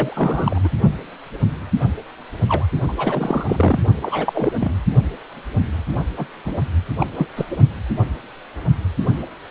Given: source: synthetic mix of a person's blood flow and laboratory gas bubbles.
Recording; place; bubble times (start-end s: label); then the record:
Doppler ultrasound of blood flow; precordium
0.00-0.59 s: bubbles
0.64-0.69 s: bubbles
2.48-2.66 s: bubbles
2.88-2.94 s: bubbles
2.97-3.79 s: bubbles
4.01-4.53 s: bubbles
4.60-4.71 s: bubbles
6.17-6.26 s: bubbles
6.45-6.59 s: bubbles
6.99-7.07 s: bubbles
7.16-7.28 s: bubbles
7.37-7.45 s: bubbles
7.50-7.57 s: bubbles
From the record:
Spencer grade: 3 (all of the cardiac periods contain showers or single bubble signals, but not dominating or overriding the cardiac motion signals); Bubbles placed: only in the low amplitude regions of the cardiac cycle